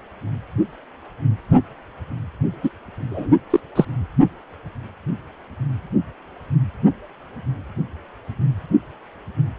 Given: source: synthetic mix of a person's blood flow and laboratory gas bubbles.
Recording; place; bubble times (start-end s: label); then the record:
Doppler ultrasound of blood flow; precordium
2.63-2.70 s: bubbles
3.10-3.36 s: bubbles
3.50-3.60 s: bubbles
3.75-3.85 s: bubbles
From the record:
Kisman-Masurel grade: 213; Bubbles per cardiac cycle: several, 3 to 8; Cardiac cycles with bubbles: 1 to 10%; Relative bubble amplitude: loud (0.450 to 0.775); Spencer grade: 1 (occasional bubble signal discernible with the cardiac motion signal, with majority of cardiac periods free of bubbles); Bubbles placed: only in the low amplitude regions of the cardiac cycle